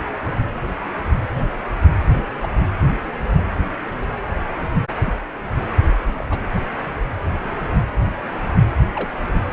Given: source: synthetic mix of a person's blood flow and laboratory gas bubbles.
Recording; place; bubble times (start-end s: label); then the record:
Doppler ultrasound of blood flow; precordium
2.41-2.49 s: bubbles
5.05-5.13 s: bubbles
6.15-6.26 s: bubbles
6.30-6.39 s: bubbles
8.95-9.11 s: bubbles
From the record:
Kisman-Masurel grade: 121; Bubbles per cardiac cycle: 1 to 2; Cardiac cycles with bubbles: 10 to 50%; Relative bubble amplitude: barely perceptible (0.100 to 0.250); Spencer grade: 2 (many but less than half of the cardiac periods contain bubble signals, singularly or in groups); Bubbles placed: anywhere in the cardiac cycle